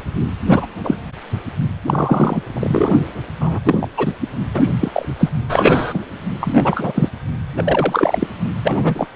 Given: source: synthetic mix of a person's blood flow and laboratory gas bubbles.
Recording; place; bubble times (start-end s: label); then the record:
Doppler ultrasound of blood flow; precordium
0.45-0.67 s: bubbles
0.83-0.95 s: bubbles
1.85-2.42 s: bubbles
2.53-2.95 s: bubbles
3.40-3.59 s: bubbles
3.65-3.88 s: bubbles
3.96-4.12 s: bubbles
4.54-4.71 s: bubbles
4.79-5.06 s: bubbles
5.20-5.29 s: bubbles
5.49-6.05 s: bubbles
6.40-7.08 s: bubbles
7.57-8.27 s: bubbles
8.64-9.07 s: bubbles
From the record:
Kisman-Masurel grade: 243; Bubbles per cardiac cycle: several, 3 to 8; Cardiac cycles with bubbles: 100%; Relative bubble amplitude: loud (0.450 to 0.775); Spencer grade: 3 (all of the cardiac periods contain showers or single bubble signals, but not dominating or overriding the cardiac motion signals); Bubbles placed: anywhere in the cardiac cycle